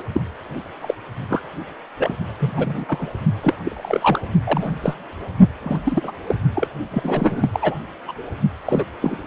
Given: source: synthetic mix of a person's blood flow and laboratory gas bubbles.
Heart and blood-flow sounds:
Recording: Doppler ultrasound of blood flow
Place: precordium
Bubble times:
0.00-0.02 s: bubbles
0.14-0.22 s: bubbles
0.81-0.94 s: bubbles
1.29-1.41 s: bubbles
1.95-2.16 s: bubbles
2.40-2.86 s: bubbles
2.88-3.09 s: bubbles
3.42-3.54 s: bubbles
3.63-4.19 s: bubbles
4.46-4.70 s: bubbles
4.81-4.94 s: bubbles
5.63-5.77 s: bubbles
5.83-6.12 s: bubbles
6.26-6.35 s: bubbles
6.55-6.67 s: bubbles
6.91-7.79 s: bubbles
8.07-8.12 s: bubbles
8.65-8.85 s: bubbles
9.02-9.16 s: bubbles
From the record:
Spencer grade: 3 (all of the cardiac periods contain showers or single bubble signals, but not dominating or overriding the cardiac motion signals)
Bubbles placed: only in the low amplitude regions of the cardiac cycle

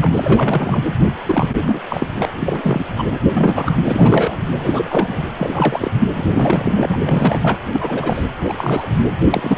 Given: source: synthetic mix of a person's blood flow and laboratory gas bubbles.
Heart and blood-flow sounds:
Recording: Doppler ultrasound of blood flow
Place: precordium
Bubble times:
0.01-0.12 s: bubbles
0.15-0.83 s: bubbles
1.25-1.50 s: bubbles
1.67-1.82 s: bubbles
1.89-2.08 s: bubbles
2.18-2.26 s: bubbles
2.33-2.85 s: bubbles
2.98-3.04 s: bubbles
3.10-3.18 s: bubbles
3.33-3.76 s: bubbles
3.86-4.38 s: bubbles
4.58-5.23 s: bubbles
5.36-5.91 s: bubbles
6.13-7.57 s: bubbles
7.73-8.23 s: bubbles
8.44-8.54 s: bubbles
8.57-8.88 s: bubbles
9.20-9.27 s: bubbles
9.31-9.58 s: bubbles
From the record:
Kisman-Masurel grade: 342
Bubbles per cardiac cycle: rolling drumbeat, 9 or more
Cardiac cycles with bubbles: 100%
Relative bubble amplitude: moderate (0.250 to 0.450)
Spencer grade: 3 (all of the cardiac periods contain showers or single bubble signals, but not dominating or overriding the cardiac motion signals)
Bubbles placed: anywhere in the cardiac cycle

